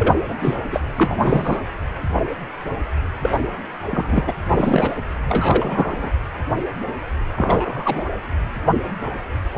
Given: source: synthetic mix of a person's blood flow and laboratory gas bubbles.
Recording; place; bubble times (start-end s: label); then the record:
Doppler ultrasound of blood flow; precordium
0.00-0.14 s: bubbles
0.28-0.36 s: bubbles
0.41-0.56 s: bubbles
0.72-0.81 s: bubbles
0.96-1.61 s: bubbles
3.22-3.29 s: bubbles
3.90-4.33 s: bubbles
4.48-4.95 s: bubbles
5.27-6.13 s: bubbles
7.36-8.04 s: bubbles
9.54-9.58 s: bubbles
From the record:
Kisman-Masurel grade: 232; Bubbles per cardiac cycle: several, 3 to 8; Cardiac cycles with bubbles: 50 to 99%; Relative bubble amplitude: moderate (0.250 to 0.450); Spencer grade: 3 (all of the cardiac periods contain showers or single bubble signals, but not dominating or overriding the cardiac motion signals); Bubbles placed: anywhere in the cardiac cycle